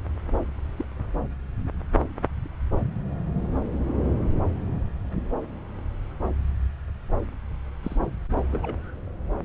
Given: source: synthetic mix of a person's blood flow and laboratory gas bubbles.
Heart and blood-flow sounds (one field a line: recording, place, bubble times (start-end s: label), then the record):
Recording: Doppler ultrasound of blood flow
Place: subclavian vein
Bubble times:
0.76-0.84 s: bubbles
7.82-7.96 s: bubbles
8.50-8.76 s: bubbles
From the record:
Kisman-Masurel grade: 121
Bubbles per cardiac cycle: 1 to 2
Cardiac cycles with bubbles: 10 to 50%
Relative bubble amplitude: barely perceptible (0.100 to 0.250)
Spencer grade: 2 (many but less than half of the cardiac periods contain bubble signals, singularly or in groups)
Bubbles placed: anywhere in the cardiac cycle